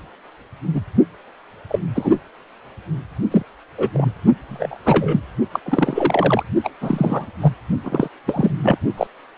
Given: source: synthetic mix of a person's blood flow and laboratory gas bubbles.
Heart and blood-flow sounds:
Doppler ultrasound of blood flow; precordium
0.74-0.81 s: bubbles
1.69-1.79 s: bubbles
1.95-2.19 s: bubbles
3.30-3.42 s: bubbles
3.77-3.89 s: bubbles
3.93-4.06 s: bubbles
4.49-4.77 s: bubbles
4.83-5.22 s: bubbles
5.52-5.59 s: bubbles
5.66-6.43 s: bubbles
6.63-6.71 s: bubbles
6.81-7.26 s: bubbles
7.41-7.52 s: bubbles
7.83-8.09 s: bubbles
8.27-8.52 s: bubbles
8.62-8.77 s: bubbles
8.97-9.07 s: bubbles
From the record:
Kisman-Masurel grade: 242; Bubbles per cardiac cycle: several, 3 to 8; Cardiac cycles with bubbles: 100%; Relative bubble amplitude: moderate (0.250 to 0.450); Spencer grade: 3 (all of the cardiac periods contain showers or single bubble signals, but not dominating or overriding the cardiac motion signals); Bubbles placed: only in the low amplitude regions of the cardiac cycle

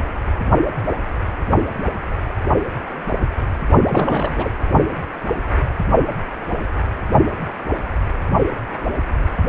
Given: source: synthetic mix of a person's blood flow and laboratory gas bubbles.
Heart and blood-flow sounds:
Doppler ultrasound of blood flow; precordium
3.88-4.50 s: bubbles
From the record:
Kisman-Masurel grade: 212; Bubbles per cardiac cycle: several, 3 to 8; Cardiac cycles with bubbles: 1 to 10%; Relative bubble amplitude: moderate (0.250 to 0.450); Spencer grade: 1 (occasional bubble signal discernible with the cardiac motion signal, with majority of cardiac periods free of bubbles); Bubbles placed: only in the low amplitude regions of the cardiac cycle

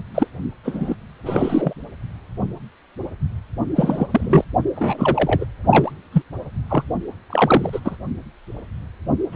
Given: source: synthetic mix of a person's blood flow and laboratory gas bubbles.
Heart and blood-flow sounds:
Doppler ultrasound of blood flow; precordium
0.14-0.27 s: bubbles
0.64-0.95 s: bubbles
1.24-1.73 s: bubbles
3.75-4.06 s: bubbles
4.11-4.44 s: bubbles
4.75-5.45 s: bubbles
5.69-5.92 s: bubbles
6.12-6.22 s: bubbles
6.68-6.83 s: bubbles
7.29-7.69 s: bubbles
7.72-7.80 s: bubbles
7.84-7.96 s: bubbles
9.32-9.36 s: bubbles
From the record:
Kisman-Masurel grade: 233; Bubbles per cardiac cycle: several, 3 to 8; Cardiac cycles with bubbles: 50 to 99%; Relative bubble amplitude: loud (0.450 to 0.775); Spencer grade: 3 (all of the cardiac periods contain showers or single bubble signals, but not dominating or overriding the cardiac motion signals); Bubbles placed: only in the low amplitude regions of the cardiac cycle

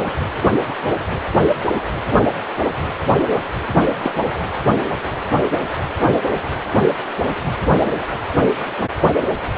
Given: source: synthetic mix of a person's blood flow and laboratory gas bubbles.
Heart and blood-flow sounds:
Doppler ultrasound of blood flow; precordium
4.03-4.15 s: bubbles
From the record:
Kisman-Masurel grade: 112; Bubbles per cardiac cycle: 1 to 2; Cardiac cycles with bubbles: 1 to 10%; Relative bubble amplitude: moderate (0.250 to 0.450); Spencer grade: 1 (occasional bubble signal discernible with the cardiac motion signal, with majority of cardiac periods free of bubbles); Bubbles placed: anywhere in the cardiac cycle

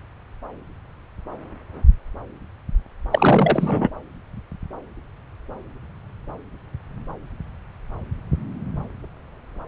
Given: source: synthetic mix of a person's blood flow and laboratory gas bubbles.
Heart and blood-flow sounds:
Doppler ultrasound of blood flow; subclavian vein
3.11-3.90 s: bubbles
From the record:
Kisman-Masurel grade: 213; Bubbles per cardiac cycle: several, 3 to 8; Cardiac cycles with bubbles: 1 to 10%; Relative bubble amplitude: loud (0.450 to 0.775); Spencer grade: 1 (occasional bubble signal discernible with the cardiac motion signal, with majority of cardiac periods free of bubbles); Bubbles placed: anywhere in the cardiac cycle

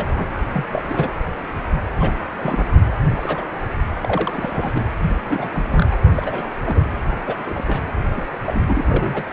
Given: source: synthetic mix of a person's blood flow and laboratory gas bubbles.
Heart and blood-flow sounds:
Doppler ultrasound of blood flow; precordium
0.00-0.26 s: bubbles
0.53-0.65 s: bubbles
0.70-0.82 s: bubbles
0.89-1.11 s: bubbles
1.98-2.13 s: bubbles
2.42-2.64 s: bubbles
3.16-3.44 s: bubbles
4.01-4.84 s: bubbles
5.29-5.50 s: bubbles
5.52-5.86 s: bubbles
5.91-5.96 s: bubbles
6.14-6.48 s: bubbles
6.65-6.88 s: bubbles
7.26-7.63 s: bubbles
7.67-7.83 s: bubbles
8.16-8.22 s: bubbles
8.45-8.85 s: bubbles
8.88-9.29 s: bubbles
From the record:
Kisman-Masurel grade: 242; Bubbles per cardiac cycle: several, 3 to 8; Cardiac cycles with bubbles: 100%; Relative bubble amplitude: moderate (0.250 to 0.450); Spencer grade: 3 (all of the cardiac periods contain showers or single bubble signals, but not dominating or overriding the cardiac motion signals); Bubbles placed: only in the low amplitude regions of the cardiac cycle

